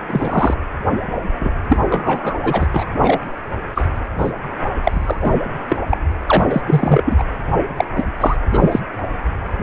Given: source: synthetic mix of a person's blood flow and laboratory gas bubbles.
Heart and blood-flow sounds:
Doppler ultrasound of blood flow; precordium
0.08-0.56 s: bubbles
1.40-1.50 s: bubbles
1.69-1.79 s: bubbles
1.89-2.40 s: bubbles
2.42-2.67 s: bubbles
2.72-2.84 s: bubbles
3.01-3.20 s: bubbles
3.75-3.88 s: bubbles
4.18-4.32 s: bubbles
4.83-5.38 s: bubbles
5.68-5.76 s: bubbles
5.90-5.97 s: bubbles
6.26-6.45 s: bubbles
6.50-6.62 s: bubbles
6.66-7.02 s: bubbles
7.04-7.24 s: bubbles
7.76-7.85 s: bubbles
7.95-8.05 s: bubbles
8.20-8.36 s: bubbles
8.53-8.80 s: bubbles
From the record:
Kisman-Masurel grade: 243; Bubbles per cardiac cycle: several, 3 to 8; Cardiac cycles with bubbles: 100%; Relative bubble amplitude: loud (0.450 to 0.775); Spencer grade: 3 (all of the cardiac periods contain showers or single bubble signals, but not dominating or overriding the cardiac motion signals); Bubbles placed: anywhere in the cardiac cycle

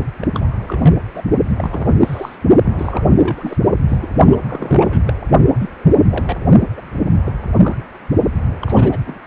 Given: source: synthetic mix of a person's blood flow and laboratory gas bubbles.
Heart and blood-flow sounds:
Doppler ultrasound of blood flow; precordium
0.22-0.27 s: bubbles
0.34-0.51 s: bubbles
0.68-0.96 s: bubbles
1.15-1.22 s: bubbles
1.56-1.95 s: bubbles
2.01-2.37 s: bubbles
2.62-3.56 s: bubbles
3.88-3.98 s: bubbles
4.02-4.08 s: bubbles
4.25-4.39 s: bubbles
4.42-5.02 s: bubbles
5.07-5.13 s: bubbles
5.58-5.70 s: bubbles
5.90-5.95 s: bubbles
6.09-6.36 s: bubbles
6.77-6.82 s: bubbles
7.25-7.33 s: bubbles
7.62-7.76 s: bubbles
8.61-8.98 s: bubbles
9.05-9.18 s: bubbles
From the record:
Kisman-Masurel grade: 232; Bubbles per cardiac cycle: several, 3 to 8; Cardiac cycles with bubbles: 50 to 99%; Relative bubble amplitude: moderate (0.250 to 0.450); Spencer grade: 3 (all of the cardiac periods contain showers or single bubble signals, but not dominating or overriding the cardiac motion signals); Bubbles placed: only in the low amplitude regions of the cardiac cycle

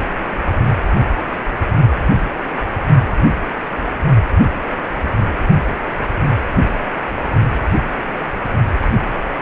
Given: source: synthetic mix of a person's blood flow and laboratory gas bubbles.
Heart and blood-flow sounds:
Doppler ultrasound of blood flow; precordium
8.80-8.88 s: bubbles
From the record:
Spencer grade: 1 (occasional bubble signal discernible with the cardiac motion signal, with majority of cardiac periods free of bubbles); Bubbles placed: only in the low amplitude regions of the cardiac cycle

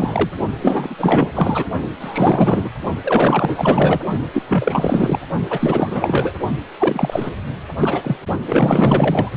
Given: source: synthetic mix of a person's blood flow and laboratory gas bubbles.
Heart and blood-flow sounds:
Doppler ultrasound of blood flow; precordium
0.00-0.30 s: bubbles
0.60-0.94 s: bubbles
0.98-1.32 s: bubbles
1.34-1.66 s: bubbles
2.00-2.69 s: bubbles
3.04-4.00 s: bubbles
4.33-4.43 s: bubbles
4.47-5.19 s: bubbles
5.50-6.33 s: bubbles
6.78-7.32 s: bubbles
7.76-8.17 s: bubbles
8.46-9.30 s: bubbles
From the record:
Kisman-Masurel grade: 444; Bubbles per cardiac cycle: continuous sound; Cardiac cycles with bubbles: 100%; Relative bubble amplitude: maximal (0.775 to 0.999); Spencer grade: 4 (maximum detectable bubble signal sounding continuously throughout systole and diastole of every cardiac period, and overriding the amplitude of the normal cardiac signals); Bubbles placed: only in the low amplitude regions of the cardiac cycle

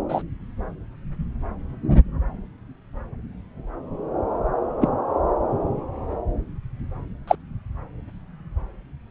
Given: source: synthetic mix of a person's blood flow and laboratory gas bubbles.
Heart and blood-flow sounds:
Doppler ultrasound of blood flow; subclavian vein
0.09-0.22 s: bubbles
4.81-4.88 s: bubbles
7.27-7.35 s: bubbles
From the record:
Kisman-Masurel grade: 123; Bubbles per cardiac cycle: 1 to 2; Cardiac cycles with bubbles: 10 to 50%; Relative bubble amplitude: loud (0.450 to 0.775); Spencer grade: 2 (many but less than half of the cardiac periods contain bubble signals, singularly or in groups); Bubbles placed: anywhere in the cardiac cycle

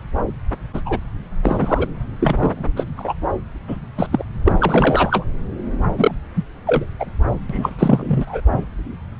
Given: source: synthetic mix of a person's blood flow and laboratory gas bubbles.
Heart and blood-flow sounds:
Doppler ultrasound of blood flow; subclavian vein
0.73-0.81 s: bubbles
0.85-0.99 s: bubbles
1.42-1.88 s: bubbles
2.20-2.64 s: bubbles
2.76-2.84 s: bubbles
2.96-3.13 s: bubbles
3.67-3.78 s: bubbles
3.97-4.06 s: bubbles
4.12-4.25 s: bubbles
4.45-4.53 s: bubbles
4.58-5.25 s: bubbles
5.97-6.12 s: bubbles
6.35-6.43 s: bubbles
6.67-6.85 s: bubbles
6.99-7.05 s: bubbles
7.50-7.75 s: bubbles
7.79-8.40 s: bubbles
From the record:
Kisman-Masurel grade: 243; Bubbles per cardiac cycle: several, 3 to 8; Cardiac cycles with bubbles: 100%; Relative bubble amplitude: loud (0.450 to 0.775); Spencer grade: 3 (all of the cardiac periods contain showers or single bubble signals, but not dominating or overriding the cardiac motion signals); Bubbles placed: anywhere in the cardiac cycle

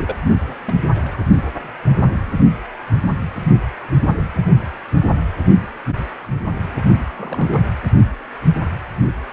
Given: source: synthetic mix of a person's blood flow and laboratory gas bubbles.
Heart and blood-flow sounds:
Doppler ultrasound of blood flow; precordium
0.00-0.18 s: bubbles
0.44-0.56 s: bubbles
0.62-0.74 s: bubbles
0.83-0.87 s: bubbles
0.94-1.16 s: bubbles
6.98-7.04 s: bubbles
7.14-7.65 s: bubbles
From the record:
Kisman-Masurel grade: 221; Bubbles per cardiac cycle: several, 3 to 8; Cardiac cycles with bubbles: 10 to 50%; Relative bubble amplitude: barely perceptible (0.100 to 0.250); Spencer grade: 2 (many but less than half of the cardiac periods contain bubble signals, singularly or in groups); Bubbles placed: only in the low amplitude regions of the cardiac cycle

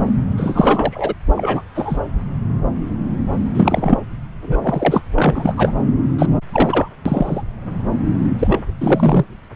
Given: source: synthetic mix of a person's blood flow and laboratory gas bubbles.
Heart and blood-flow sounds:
Doppler ultrasound of blood flow; subclavian vein
0.37-1.14 s: bubbles
1.36-1.62 s: bubbles
1.76-1.99 s: bubbles
3.54-3.98 s: bubbles
4.42-5.01 s: bubbles
5.16-5.54 s: bubbles
5.57-5.72 s: bubbles
6.19-6.27 s: bubbles
6.52-6.88 s: bubbles
7.05-7.42 s: bubbles
8.39-8.59 s: bubbles
8.80-9.25 s: bubbles
From the record:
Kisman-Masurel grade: 233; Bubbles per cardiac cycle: several, 3 to 8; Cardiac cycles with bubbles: 50 to 99%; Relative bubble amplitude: loud (0.450 to 0.775); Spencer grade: 3 (all of the cardiac periods contain showers or single bubble signals, but not dominating or overriding the cardiac motion signals); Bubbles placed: anywhere in the cardiac cycle

